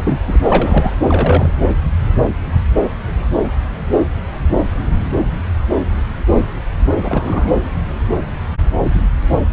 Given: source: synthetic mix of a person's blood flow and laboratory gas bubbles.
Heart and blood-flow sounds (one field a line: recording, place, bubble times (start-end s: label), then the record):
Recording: Doppler ultrasound of blood flow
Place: subclavian vein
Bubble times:
0.00-0.20 s: bubbles
0.27-0.40 s: bubbles
0.43-0.93 s: bubbles
1.07-1.51 s: bubbles
7.02-7.52 s: bubbles
From the record:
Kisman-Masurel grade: 222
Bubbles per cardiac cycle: several, 3 to 8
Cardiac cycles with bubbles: 10 to 50%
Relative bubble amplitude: moderate (0.250 to 0.450)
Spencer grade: 2 (many but less than half of the cardiac periods contain bubble signals, singularly or in groups)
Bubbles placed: anywhere in the cardiac cycle